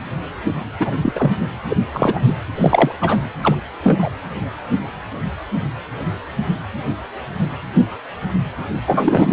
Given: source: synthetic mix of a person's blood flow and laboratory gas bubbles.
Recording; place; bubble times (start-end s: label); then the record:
Doppler ultrasound of blood flow; precordium
0.79-0.97 s: bubbles
1.02-1.31 s: bubbles
1.70-1.76 s: bubbles
1.93-2.34 s: bubbles
2.55-2.94 s: bubbles
3.01-3.17 s: bubbles
3.42-3.55 s: bubbles
3.83-4.09 s: bubbles
8.87-9.33 s: bubbles
From the record:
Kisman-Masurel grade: 223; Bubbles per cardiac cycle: several, 3 to 8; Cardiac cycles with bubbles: 10 to 50%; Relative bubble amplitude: loud (0.450 to 0.775); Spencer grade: 2 (many but less than half of the cardiac periods contain bubble signals, singularly or in groups); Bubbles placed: anywhere in the cardiac cycle